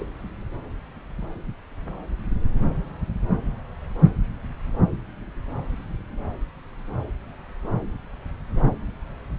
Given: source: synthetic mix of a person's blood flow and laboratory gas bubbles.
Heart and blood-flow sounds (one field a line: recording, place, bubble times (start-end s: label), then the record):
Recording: Doppler ultrasound of blood flow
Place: subclavian vein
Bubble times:
0.00-0.06 s: bubbles
From the record:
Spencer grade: 2 (many but less than half of the cardiac periods contain bubble signals, singularly or in groups)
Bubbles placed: anywhere in the cardiac cycle